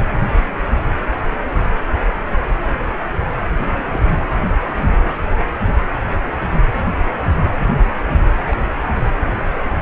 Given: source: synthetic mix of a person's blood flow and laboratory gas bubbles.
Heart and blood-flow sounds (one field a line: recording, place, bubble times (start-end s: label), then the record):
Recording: Doppler ultrasound of blood flow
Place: precordium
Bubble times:
3.56-4.01 s: bubbles
4.95-5.16 s: bubbles
8.51-8.56 s: bubbles
From the record:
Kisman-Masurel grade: 121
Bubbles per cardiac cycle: 1 to 2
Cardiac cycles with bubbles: 10 to 50%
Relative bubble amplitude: barely perceptible (0.100 to 0.250)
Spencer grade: 2 (many but less than half of the cardiac periods contain bubble signals, singularly or in groups)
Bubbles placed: anywhere in the cardiac cycle